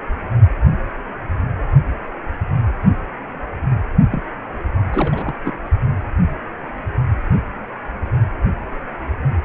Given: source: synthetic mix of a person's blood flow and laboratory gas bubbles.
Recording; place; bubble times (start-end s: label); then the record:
Doppler ultrasound of blood flow; precordium
4.12-4.23 s: bubbles
4.92-5.35 s: bubbles
5.45-5.57 s: bubbles
From the record:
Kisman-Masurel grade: 222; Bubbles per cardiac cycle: several, 3 to 8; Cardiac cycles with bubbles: 10 to 50%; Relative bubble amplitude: moderate (0.250 to 0.450); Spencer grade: 2 (many but less than half of the cardiac periods contain bubble signals, singularly or in groups); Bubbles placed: only in the low amplitude regions of the cardiac cycle